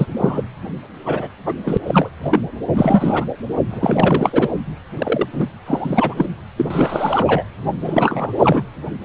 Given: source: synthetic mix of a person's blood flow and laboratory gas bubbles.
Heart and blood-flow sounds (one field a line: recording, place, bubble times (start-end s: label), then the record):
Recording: Doppler ultrasound of blood flow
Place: precordium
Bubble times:
0.00-0.07 s: bubbles
0.17-0.43 s: bubbles
1.05-1.28 s: bubbles
1.46-1.56 s: bubbles
1.64-1.77 s: bubbles
1.86-2.10 s: bubbles
2.23-2.39 s: bubbles
2.73-3.25 s: bubbles
3.70-4.49 s: bubbles
4.97-5.27 s: bubbles
5.32-5.47 s: bubbles
5.66-6.26 s: bubbles
6.57-7.43 s: bubbles
7.84-8.63 s: bubbles
From the record:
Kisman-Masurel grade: 243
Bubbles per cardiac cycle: several, 3 to 8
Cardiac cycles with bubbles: 100%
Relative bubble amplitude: loud (0.450 to 0.775)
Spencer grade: 3 (all of the cardiac periods contain showers or single bubble signals, but not dominating or overriding the cardiac motion signals)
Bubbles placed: anywhere in the cardiac cycle